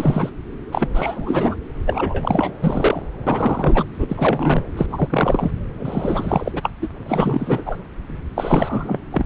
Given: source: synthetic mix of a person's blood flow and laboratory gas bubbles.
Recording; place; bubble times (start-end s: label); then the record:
Doppler ultrasound of blood flow; subclavian vein
0.00-0.30 s: bubbles
0.72-0.88 s: bubbles
0.94-1.55 s: bubbles
1.86-2.56 s: bubbles
2.61-3.03 s: bubbles
3.26-3.85 s: bubbles
3.98-4.64 s: bubbles
4.76-4.87 s: bubbles
4.90-5.51 s: bubbles
5.79-6.69 s: bubbles
6.81-6.88 s: bubbles
7.05-7.63 s: bubbles
7.65-7.77 s: bubbles
8.36-8.99 s: bubbles
9.12-9.25 s: bubbles
From the record:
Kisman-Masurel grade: 342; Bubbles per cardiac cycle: rolling drumbeat, 9 or more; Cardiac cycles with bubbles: 100%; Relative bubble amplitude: moderate (0.250 to 0.450); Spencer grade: 3 (all of the cardiac periods contain showers or single bubble signals, but not dominating or overriding the cardiac motion signals); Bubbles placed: anywhere in the cardiac cycle